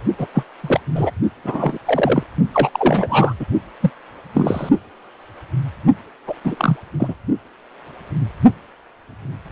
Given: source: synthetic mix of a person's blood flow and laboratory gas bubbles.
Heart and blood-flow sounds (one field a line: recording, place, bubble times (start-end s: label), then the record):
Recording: Doppler ultrasound of blood flow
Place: precordium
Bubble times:
0.18-0.27 s: bubbles
0.34-0.44 s: bubbles
0.61-0.80 s: bubbles
0.94-1.11 s: bubbles
1.44-1.78 s: bubbles
1.85-2.23 s: bubbles
2.52-2.69 s: bubbles
2.72-3.33 s: bubbles
3.40-3.46 s: bubbles
3.80-3.91 s: bubbles
4.33-4.70 s: bubbles
6.27-6.34 s: bubbles
6.44-6.77 s: bubbles
7.00-7.14 s: bubbles
From the record:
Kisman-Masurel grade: 233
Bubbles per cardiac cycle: several, 3 to 8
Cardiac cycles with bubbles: 50 to 99%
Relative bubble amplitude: loud (0.450 to 0.775)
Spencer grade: 3 (all of the cardiac periods contain showers or single bubble signals, but not dominating or overriding the cardiac motion signals)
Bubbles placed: only in the low amplitude regions of the cardiac cycle